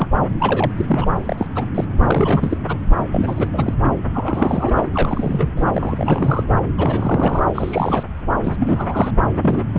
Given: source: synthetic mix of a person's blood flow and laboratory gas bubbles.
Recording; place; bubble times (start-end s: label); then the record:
Doppler ultrasound of blood flow; subclavian vein
0.00-0.07 s: bubbles
0.40-0.71 s: bubbles
0.76-1.11 s: bubbles
1.16-1.47 s: bubbles
1.55-1.65 s: bubbles
1.75-1.84 s: bubbles
2.02-2.58 s: bubbles
2.68-2.78 s: bubbles
3.12-3.48 s: bubbles
3.53-3.73 s: bubbles
4.13-4.87 s: bubbles
4.93-5.50 s: bubbles
5.57-5.66 s: bubbles
5.74-6.43 s: bubbles
6.77-7.43 s: bubbles
7.54-8.03 s: bubbles
8.43-8.56 s: bubbles
8.60-9.11 s: bubbles
9.35-9.63 s: bubbles
9.73-9.79 s: bubbles
From the record:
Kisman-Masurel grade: 342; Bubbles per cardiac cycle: rolling drumbeat, 9 or more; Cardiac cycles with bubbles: 100%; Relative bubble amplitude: moderate (0.250 to 0.450); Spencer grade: 3 (all of the cardiac periods contain showers or single bubble signals, but not dominating or overriding the cardiac motion signals); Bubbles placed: anywhere in the cardiac cycle